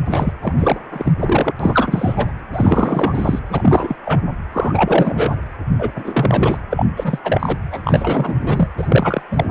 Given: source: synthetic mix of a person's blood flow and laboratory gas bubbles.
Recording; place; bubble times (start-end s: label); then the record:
Doppler ultrasound of blood flow; precordium
0.05-0.33 s: bubbles
0.42-0.53 s: bubbles
0.57-0.79 s: bubbles
0.92-1.13 s: bubbles
1.19-1.53 s: bubbles
1.59-2.32 s: bubbles
2.52-3.39 s: bubbles
3.49-3.96 s: bubbles
4.05-4.21 s: bubbles
4.53-5.37 s: bubbles
5.79-5.92 s: bubbles
5.96-6.59 s: bubbles
6.71-6.86 s: bubbles
6.96-7.20 s: bubbles
7.24-7.58 s: bubbles
7.71-7.80 s: bubbles
7.84-8.35 s: bubbles
8.39-8.68 s: bubbles
8.77-9.22 s: bubbles
9.31-9.46 s: bubbles
From the record:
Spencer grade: 3 (all of the cardiac periods contain showers or single bubble signals, but not dominating or overriding the cardiac motion signals); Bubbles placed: anywhere in the cardiac cycle